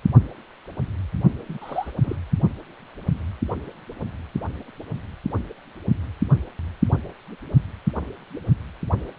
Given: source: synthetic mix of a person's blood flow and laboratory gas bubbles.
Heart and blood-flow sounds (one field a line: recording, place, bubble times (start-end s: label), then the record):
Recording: Doppler ultrasound of blood flow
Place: precordium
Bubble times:
1.49-1.92 s: bubbles
2.02-2.16 s: bubbles
From the record:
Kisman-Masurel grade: 211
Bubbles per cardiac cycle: several, 3 to 8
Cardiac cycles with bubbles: 1 to 10%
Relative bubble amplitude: barely perceptible (0.100 to 0.250)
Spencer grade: 1 (occasional bubble signal discernible with the cardiac motion signal, with majority of cardiac periods free of bubbles)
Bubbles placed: only in the low amplitude regions of the cardiac cycle